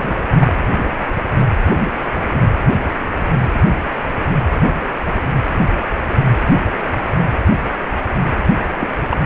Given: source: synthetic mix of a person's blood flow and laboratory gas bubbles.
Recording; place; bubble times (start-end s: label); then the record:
Doppler ultrasound of blood flow; precordium
0.00-0.24 s: bubbles
0.35-0.53 s: bubbles
8.80-8.89 s: bubbles
9.09-9.17 s: bubbles
From the record:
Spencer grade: 2 (many but less than half of the cardiac periods contain bubble signals, singularly or in groups); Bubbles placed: anywhere in the cardiac cycle